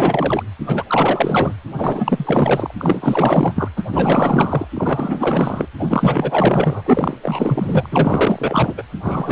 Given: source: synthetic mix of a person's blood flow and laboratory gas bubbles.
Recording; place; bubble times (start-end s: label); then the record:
Doppler ultrasound of blood flow; precordium
0.00-0.43 s: bubbles
0.66-0.83 s: bubbles
0.87-1.53 s: bubbles
1.77-2.73 s: bubbles
2.79-3.69 s: bubbles
3.76-3.84 s: bubbles
3.88-4.68 s: bubbles
4.74-5.66 s: bubbles
5.79-6.81 s: bubbles
6.85-7.17 s: bubbles
7.22-7.88 s: bubbles
7.91-8.74 s: bubbles
8.77-8.83 s: bubbles
9.03-9.32 s: bubbles
From the record:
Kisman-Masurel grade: 444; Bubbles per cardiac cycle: continuous sound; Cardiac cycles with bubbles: 100%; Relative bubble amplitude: maximal (0.775 to 0.999); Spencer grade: 4 (maximum detectable bubble signal sounding continuously throughout systole and diastole of every cardiac period, and overriding the amplitude of the normal cardiac signals); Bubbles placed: anywhere in the cardiac cycle